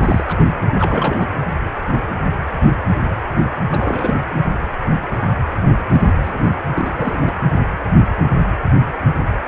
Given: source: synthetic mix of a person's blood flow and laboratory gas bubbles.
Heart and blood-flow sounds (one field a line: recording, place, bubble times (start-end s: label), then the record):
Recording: Doppler ultrasound of blood flow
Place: precordium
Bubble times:
0.02-0.24 s: bubbles
0.27-0.47 s: bubbles
0.76-1.29 s: bubbles
3.71-4.21 s: bubbles
5.93-6.15 s: bubbles
6.22-6.50 s: bubbles
6.75-7.37 s: bubbles
From the record:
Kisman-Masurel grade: 222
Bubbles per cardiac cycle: several, 3 to 8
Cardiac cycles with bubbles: 10 to 50%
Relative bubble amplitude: moderate (0.250 to 0.450)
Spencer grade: 2 (many but less than half of the cardiac periods contain bubble signals, singularly or in groups)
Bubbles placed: anywhere in the cardiac cycle